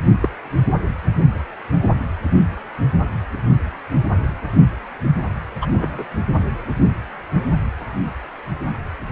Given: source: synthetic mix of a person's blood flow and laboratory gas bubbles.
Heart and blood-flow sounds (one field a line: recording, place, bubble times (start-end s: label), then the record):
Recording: Doppler ultrasound of blood flow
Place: precordium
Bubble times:
0.21-0.28 s: bubbles
5.61-5.67 s: bubbles
5.72-6.05 s: bubbles
From the record:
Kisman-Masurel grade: 123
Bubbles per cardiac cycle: 1 to 2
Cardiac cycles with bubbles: 10 to 50%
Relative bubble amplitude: loud (0.450 to 0.775)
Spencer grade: 2 (many but less than half of the cardiac periods contain bubble signals, singularly or in groups)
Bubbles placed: anywhere in the cardiac cycle